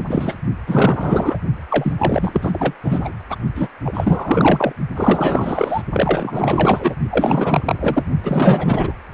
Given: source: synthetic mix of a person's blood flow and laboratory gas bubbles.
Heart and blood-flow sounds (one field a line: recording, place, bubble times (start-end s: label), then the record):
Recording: Doppler ultrasound of blood flow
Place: precordium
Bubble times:
0.00-0.04 s: bubbles
0.07-0.34 s: bubbles
0.66-1.38 s: bubbles
1.70-1.93 s: bubbles
1.99-2.74 s: bubbles
2.83-3.14 s: bubbles
3.29-3.36 s: bubbles
3.55-3.68 s: bubbles
3.84-4.73 s: bubbles
4.96-5.83 s: bubbles
5.93-6.95 s: bubbles
7.10-8.03 s: bubbles
8.23-8.93 s: bubbles
From the record:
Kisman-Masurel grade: 444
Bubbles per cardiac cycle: continuous sound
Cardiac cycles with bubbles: 100%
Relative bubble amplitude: maximal (0.775 to 0.999)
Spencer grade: 4 (maximum detectable bubble signal sounding continuously throughout systole and diastole of every cardiac period, and overriding the amplitude of the normal cardiac signals)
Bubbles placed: only in the low amplitude regions of the cardiac cycle